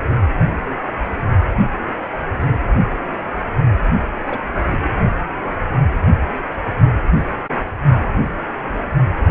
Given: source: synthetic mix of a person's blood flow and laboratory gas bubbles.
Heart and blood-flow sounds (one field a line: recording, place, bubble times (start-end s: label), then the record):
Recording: Doppler ultrasound of blood flow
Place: precordium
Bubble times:
4.26-4.39 s: bubbles
4.71-4.79 s: bubbles
From the record:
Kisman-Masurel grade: 112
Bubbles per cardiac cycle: 1 to 2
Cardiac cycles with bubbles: 1 to 10%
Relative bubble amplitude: moderate (0.250 to 0.450)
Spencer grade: 1 (occasional bubble signal discernible with the cardiac motion signal, with majority of cardiac periods free of bubbles)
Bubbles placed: only in the low amplitude regions of the cardiac cycle